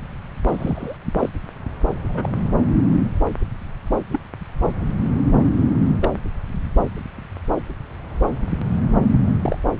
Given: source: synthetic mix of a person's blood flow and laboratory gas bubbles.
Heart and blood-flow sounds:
Doppler ultrasound of blood flow; subclavian vein
0.47-0.96 s: bubbles
1.19-1.29 s: bubbles
2.08-2.31 s: bubbles
4.12-4.21 s: bubbles
5.93-6.10 s: bubbles
9.42-9.58 s: bubbles
From the record:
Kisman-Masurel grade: 122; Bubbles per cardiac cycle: 1 to 2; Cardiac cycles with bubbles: 10 to 50%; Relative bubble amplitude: moderate (0.250 to 0.450); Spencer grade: 2 (many but less than half of the cardiac periods contain bubble signals, singularly or in groups); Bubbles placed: anywhere in the cardiac cycle

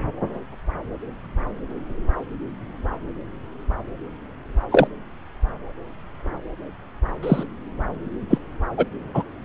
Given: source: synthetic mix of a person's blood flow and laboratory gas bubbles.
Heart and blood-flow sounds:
Doppler ultrasound of blood flow; subclavian vein
4.71-4.88 s: bubbles
7.23-7.44 s: bubbles
8.30-8.38 s: bubbles
8.77-8.86 s: bubbles
9.14-9.23 s: bubbles
From the record:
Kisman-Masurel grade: 123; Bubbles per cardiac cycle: 1 to 2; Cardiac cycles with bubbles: 10 to 50%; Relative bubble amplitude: loud (0.450 to 0.775); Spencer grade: 2 (many but less than half of the cardiac periods contain bubble signals, singularly or in groups); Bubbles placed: anywhere in the cardiac cycle

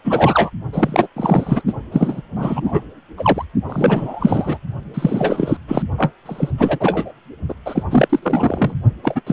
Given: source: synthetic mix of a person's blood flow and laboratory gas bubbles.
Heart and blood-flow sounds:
Doppler ultrasound of blood flow; precordium
0.04-0.50 s: bubbles
0.73-1.07 s: bubbles
1.16-1.61 s: bubbles
1.67-1.74 s: bubbles
1.92-2.21 s: bubbles
2.35-2.81 s: bubbles
3.17-3.44 s: bubbles
3.69-4.58 s: bubbles
4.94-5.57 s: bubbles
5.67-5.82 s: bubbles
5.97-6.11 s: bubbles
6.25-6.50 s: bubbles
6.57-7.11 s: bubbles
7.48-7.54 s: bubbles
7.65-7.84 s: bubbles
7.90-8.20 s: bubbles
8.22-8.74 s: bubbles
9.03-9.21 s: bubbles
9.27-9.33 s: bubbles
From the record:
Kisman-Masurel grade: 343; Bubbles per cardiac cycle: rolling drumbeat, 9 or more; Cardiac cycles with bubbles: 100%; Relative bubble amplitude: loud (0.450 to 0.775); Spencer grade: 3 (all of the cardiac periods contain showers or single bubble signals, but not dominating or overriding the cardiac motion signals); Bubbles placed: only in the low amplitude regions of the cardiac cycle

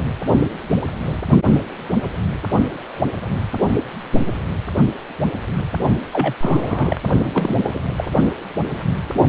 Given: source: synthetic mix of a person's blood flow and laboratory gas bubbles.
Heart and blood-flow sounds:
Doppler ultrasound of blood flow; precordium
6.12-6.33 s: bubbles
6.40-6.96 s: bubbles
7.33-7.82 s: bubbles
7.96-8.04 s: bubbles
From the record:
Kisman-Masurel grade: 223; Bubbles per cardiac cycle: several, 3 to 8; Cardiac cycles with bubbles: 10 to 50%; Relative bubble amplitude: loud (0.450 to 0.775); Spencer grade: 2 (many but less than half of the cardiac periods contain bubble signals, singularly or in groups); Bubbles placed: only in the low amplitude regions of the cardiac cycle

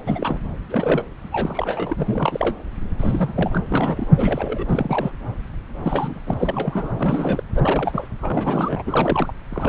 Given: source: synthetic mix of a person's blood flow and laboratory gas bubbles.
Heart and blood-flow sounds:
Doppler ultrasound of blood flow; subclavian vein
0.04-0.42 s: bubbles
0.69-1.04 s: bubbles
1.32-2.56 s: bubbles
2.99-3.58 s: bubbles
3.69-4.08 s: bubbles
4.15-4.65 s: bubbles
4.68-5.11 s: bubbles
5.82-6.21 s: bubbles
6.26-6.34 s: bubbles
6.39-7.43 s: bubbles
7.55-8.07 s: bubbles
8.19-8.83 s: bubbles
8.86-9.34 s: bubbles
9.51-9.69 s: bubbles
From the record:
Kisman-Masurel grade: 342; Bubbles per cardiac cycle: rolling drumbeat, 9 or more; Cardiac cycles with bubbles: 100%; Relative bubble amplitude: moderate (0.250 to 0.450); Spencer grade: 3 (all of the cardiac periods contain showers or single bubble signals, but not dominating or overriding the cardiac motion signals); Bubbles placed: anywhere in the cardiac cycle

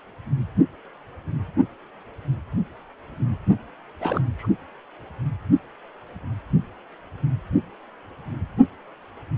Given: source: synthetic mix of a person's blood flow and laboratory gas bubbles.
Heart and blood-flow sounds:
Doppler ultrasound of blood flow; precordium
4.00-4.21 s: bubbles
4.38-4.46 s: bubbles
From the record:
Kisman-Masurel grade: 211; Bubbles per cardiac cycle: several, 3 to 8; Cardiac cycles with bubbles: 1 to 10%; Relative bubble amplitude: barely perceptible (0.100 to 0.250); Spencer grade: 1 (occasional bubble signal discernible with the cardiac motion signal, with majority of cardiac periods free of bubbles); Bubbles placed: only in the low amplitude regions of the cardiac cycle

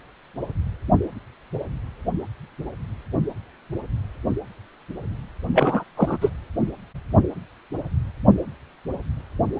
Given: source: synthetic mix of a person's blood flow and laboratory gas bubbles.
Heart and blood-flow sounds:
Doppler ultrasound of blood flow; precordium
5.54-5.84 s: bubbles
5.96-6.17 s: bubbles
6.21-6.30 s: bubbles
From the record:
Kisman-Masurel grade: 213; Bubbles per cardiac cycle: several, 3 to 8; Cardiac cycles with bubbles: 1 to 10%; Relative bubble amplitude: loud (0.450 to 0.775); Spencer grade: 1 (occasional bubble signal discernible with the cardiac motion signal, with majority of cardiac periods free of bubbles); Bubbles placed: anywhere in the cardiac cycle

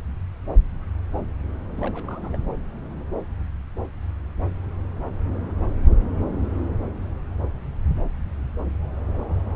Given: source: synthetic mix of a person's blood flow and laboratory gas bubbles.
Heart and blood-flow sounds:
Doppler ultrasound of blood flow; subclavian vein
1.75-2.30 s: bubbles
2.33-2.38 s: bubbles
From the record:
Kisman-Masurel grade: 211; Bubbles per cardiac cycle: several, 3 to 8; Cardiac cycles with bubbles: 1 to 10%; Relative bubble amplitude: barely perceptible (0.100 to 0.250); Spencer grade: 1 (occasional bubble signal discernible with the cardiac motion signal, with majority of cardiac periods free of bubbles); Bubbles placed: anywhere in the cardiac cycle

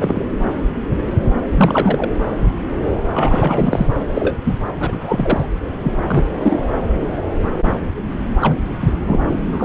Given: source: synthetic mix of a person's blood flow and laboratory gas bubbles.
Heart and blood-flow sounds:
Doppler ultrasound of blood flow; subclavian vein
0.00-0.24 s: bubbles
1.46-2.10 s: bubbles
3.13-3.86 s: bubbles
4.14-4.36 s: bubbles
4.45-4.59 s: bubbles
4.79-5.46 s: bubbles
5.83-5.93 s: bubbles
6.07-6.25 s: bubbles
6.43-6.60 s: bubbles
8.41-8.55 s: bubbles
8.80-8.92 s: bubbles
9.00-9.21 s: bubbles
9.52-9.65 s: bubbles
From the record:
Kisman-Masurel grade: 233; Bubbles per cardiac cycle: several, 3 to 8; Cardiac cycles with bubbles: 50 to 99%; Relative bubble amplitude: loud (0.450 to 0.775); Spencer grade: 3 (all of the cardiac periods contain showers or single bubble signals, but not dominating or overriding the cardiac motion signals); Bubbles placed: anywhere in the cardiac cycle

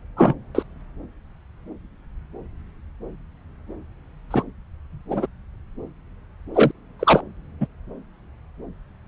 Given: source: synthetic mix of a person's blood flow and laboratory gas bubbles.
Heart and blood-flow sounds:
Doppler ultrasound of blood flow; subclavian vein
0.17-0.34 s: bubbles
0.55-0.62 s: bubbles
4.30-4.43 s: bubbles
5.10-5.26 s: bubbles
6.54-6.71 s: bubbles
6.99-7.21 s: bubbles
7.60-7.67 s: bubbles
From the record:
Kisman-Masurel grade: 223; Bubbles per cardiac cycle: several, 3 to 8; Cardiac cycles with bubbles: 10 to 50%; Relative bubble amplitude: loud (0.450 to 0.775); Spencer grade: 2 (many but less than half of the cardiac periods contain bubble signals, singularly or in groups); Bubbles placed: anywhere in the cardiac cycle

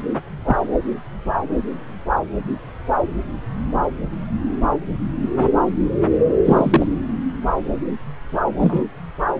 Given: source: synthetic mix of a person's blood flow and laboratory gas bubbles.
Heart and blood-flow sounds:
Doppler ultrasound of blood flow; subclavian vein
0.00-0.02 s: bubbles
0.45-0.56 s: bubbles
5.36-5.49 s: bubbles
6.44-6.87 s: bubbles
8.59-8.84 s: bubbles
From the record:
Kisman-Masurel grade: 123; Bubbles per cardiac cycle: 1 to 2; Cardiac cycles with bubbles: 10 to 50%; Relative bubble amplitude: loud (0.450 to 0.775); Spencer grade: 2 (many but less than half of the cardiac periods contain bubble signals, singularly or in groups); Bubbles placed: anywhere in the cardiac cycle

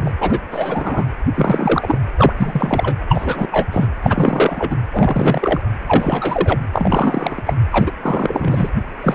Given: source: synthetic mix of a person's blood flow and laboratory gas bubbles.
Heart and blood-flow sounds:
Doppler ultrasound of blood flow; precordium
0.00-0.12 s: bubbles
0.20-0.40 s: bubbles
0.51-1.05 s: bubbles
1.34-1.99 s: bubbles
2.17-2.33 s: bubbles
2.36-2.96 s: bubbles
3.08-3.48 s: bubbles
3.51-3.68 s: bubbles
3.71-3.87 s: bubbles
4.02-4.75 s: bubbles
4.90-5.62 s: bubbles
5.88-6.58 s: bubbles
6.73-7.42 s: bubbles
7.46-7.54 s: bubbles
7.71-7.92 s: bubbles
8.01-8.69 s: bubbles
9.02-9.15 s: bubbles
From the record:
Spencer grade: 3 (all of the cardiac periods contain showers or single bubble signals, but not dominating or overriding the cardiac motion signals); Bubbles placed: anywhere in the cardiac cycle

